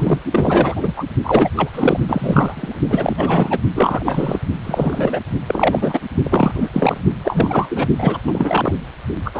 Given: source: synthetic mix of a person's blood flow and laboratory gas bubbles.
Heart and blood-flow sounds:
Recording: Doppler ultrasound of blood flow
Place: precordium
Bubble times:
0.00-0.20 s: bubbles
0.30-0.93 s: bubbles
0.96-1.05 s: bubbles
1.23-1.50 s: bubbles
1.56-1.69 s: bubbles
1.73-2.00 s: bubbles
2.08-2.75 s: bubbles
2.90-3.59 s: bubbles
3.75-4.38 s: bubbles
4.63-5.20 s: bubbles
5.47-6.00 s: bubbles
6.24-6.69 s: bubbles
6.72-6.97 s: bubbles
7.24-7.87 s: bubbles
7.98-8.18 s: bubbles
8.23-8.72 s: bubbles
9.25-9.40 s: bubbles
From the record:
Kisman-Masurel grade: 343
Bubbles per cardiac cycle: rolling drumbeat, 9 or more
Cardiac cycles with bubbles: 100%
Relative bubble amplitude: loud (0.450 to 0.775)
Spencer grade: 3 (all of the cardiac periods contain showers or single bubble signals, but not dominating or overriding the cardiac motion signals)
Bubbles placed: only in the low amplitude regions of the cardiac cycle

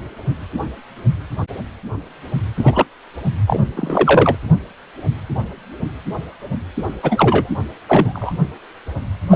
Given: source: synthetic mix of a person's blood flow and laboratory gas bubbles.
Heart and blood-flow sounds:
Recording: Doppler ultrasound of blood flow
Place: precordium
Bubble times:
2.56-2.85 s: bubbles
3.46-3.60 s: bubbles
3.76-4.36 s: bubbles
7.03-7.50 s: bubbles
7.88-8.32 s: bubbles
9.30-9.36 s: bubbles
From the record:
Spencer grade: 3 (all of the cardiac periods contain showers or single bubble signals, but not dominating or overriding the cardiac motion signals)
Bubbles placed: anywhere in the cardiac cycle

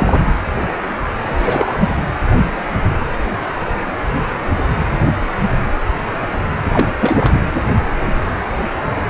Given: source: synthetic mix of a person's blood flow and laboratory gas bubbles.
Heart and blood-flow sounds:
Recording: Doppler ultrasound of blood flow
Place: precordium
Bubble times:
0.00-0.21 s: bubbles
1.22-1.91 s: bubbles
6.66-6.87 s: bubbles
7.00-7.41 s: bubbles
From the record:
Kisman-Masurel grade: 223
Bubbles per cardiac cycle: several, 3 to 8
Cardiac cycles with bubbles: 10 to 50%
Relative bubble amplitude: loud (0.450 to 0.775)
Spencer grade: 2 (many but less than half of the cardiac periods contain bubble signals, singularly or in groups)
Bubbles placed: anywhere in the cardiac cycle

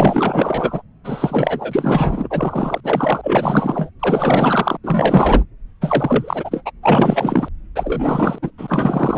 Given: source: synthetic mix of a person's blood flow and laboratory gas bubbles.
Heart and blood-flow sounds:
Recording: Doppler ultrasound of blood flow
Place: subclavian vein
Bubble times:
0.00-0.82 s: bubbles
1.04-2.81 s: bubbles
2.83-3.90 s: bubbles
3.99-4.77 s: bubbles
4.83-5.43 s: bubbles
5.81-6.63 s: bubbles
6.65-6.71 s: bubbles
6.82-7.48 s: bubbles
7.75-8.38 s: bubbles
8.42-8.50 s: bubbles
8.58-9.18 s: bubbles
From the record:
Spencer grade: 4 (maximum detectable bubble signal sounding continuously throughout systole and diastole of every cardiac period, and overriding the amplitude of the normal cardiac signals)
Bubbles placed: anywhere in the cardiac cycle

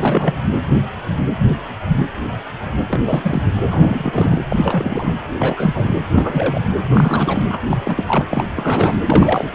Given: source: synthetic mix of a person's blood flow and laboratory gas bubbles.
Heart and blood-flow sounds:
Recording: Doppler ultrasound of blood flow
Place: precordium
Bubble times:
0.00-0.34 s: bubbles
2.89-3.43 s: bubbles
3.46-3.54 s: bubbles
3.64-4.40 s: bubbles
4.50-5.12 s: bubbles
5.36-5.93 s: bubbles
6.15-6.62 s: bubbles
6.87-7.44 s: bubbles
7.50-7.58 s: bubbles
7.69-7.78 s: bubbles
7.85-8.24 s: bubbles
8.29-8.50 s: bubbles
8.56-8.96 s: bubbles
9.05-9.52 s: bubbles
From the record:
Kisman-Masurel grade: 332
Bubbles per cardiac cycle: rolling drumbeat, 9 or more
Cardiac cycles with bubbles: 50 to 99%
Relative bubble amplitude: moderate (0.250 to 0.450)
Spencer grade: 3 (all of the cardiac periods contain showers or single bubble signals, but not dominating or overriding the cardiac motion signals)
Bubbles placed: anywhere in the cardiac cycle

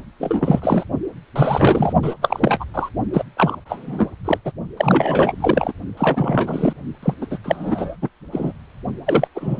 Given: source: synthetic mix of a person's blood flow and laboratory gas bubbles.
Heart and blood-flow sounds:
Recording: Doppler ultrasound of blood flow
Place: precordium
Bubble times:
0.19-0.83 s: bubbles
1.35-1.93 s: bubbles
2.02-2.14 s: bubbles
2.21-2.65 s: bubbles
2.74-2.89 s: bubbles
3.13-3.24 s: bubbles
3.36-3.56 s: bubbles
3.65-4.09 s: bubbles
4.25-4.38 s: bubbles
4.45-4.51 s: bubbles
4.76-5.33 s: bubbles
5.40-5.72 s: bubbles
5.97-6.73 s: bubbles
7.03-7.14 s: bubbles
7.21-7.26 s: bubbles
7.30-7.39 s: bubbles
7.43-7.96 s: bubbles
8.02-8.09 s: bubbles
8.32-8.53 s: bubbles
9.06-9.28 s: bubbles
9.35-9.60 s: bubbles
From the record:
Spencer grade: 3 (all of the cardiac periods contain showers or single bubble signals, but not dominating or overriding the cardiac motion signals)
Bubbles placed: only in the low amplitude regions of the cardiac cycle

